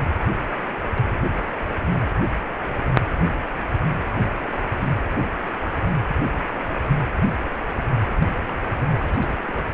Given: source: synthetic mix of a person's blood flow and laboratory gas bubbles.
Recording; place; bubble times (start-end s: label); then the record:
Doppler ultrasound of blood flow; precordium
8.18-8.65 s: bubbles
8.99-9.74 s: bubbles
From the record:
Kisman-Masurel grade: 221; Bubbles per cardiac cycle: several, 3 to 8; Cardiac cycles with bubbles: 10 to 50%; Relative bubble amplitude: barely perceptible (0.100 to 0.250); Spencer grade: 2 (many but less than half of the cardiac periods contain bubble signals, singularly or in groups); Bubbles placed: anywhere in the cardiac cycle